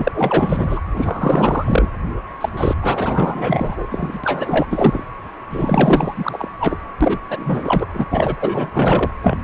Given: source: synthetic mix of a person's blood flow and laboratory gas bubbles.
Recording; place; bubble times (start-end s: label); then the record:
Doppler ultrasound of blood flow; precordium
0.00-0.81 s: bubbles
0.96-1.89 s: bubbles
2.41-2.49 s: bubbles
2.57-2.75 s: bubbles
2.82-3.87 s: bubbles
3.90-4.20 s: bubbles
4.24-4.67 s: bubbles
4.70-5.04 s: bubbles
5.50-6.49 s: bubbles
6.60-6.79 s: bubbles
7.00-7.19 s: bubbles
7.29-7.86 s: bubbles
7.93-8.05 s: bubbles
8.11-8.36 s: bubbles
8.40-8.70 s: bubbles
8.72-9.12 s: bubbles
9.21-9.38 s: bubbles
From the record:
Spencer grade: 4 (maximum detectable bubble signal sounding continuously throughout systole and diastole of every cardiac period, and overriding the amplitude of the normal cardiac signals); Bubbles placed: anywhere in the cardiac cycle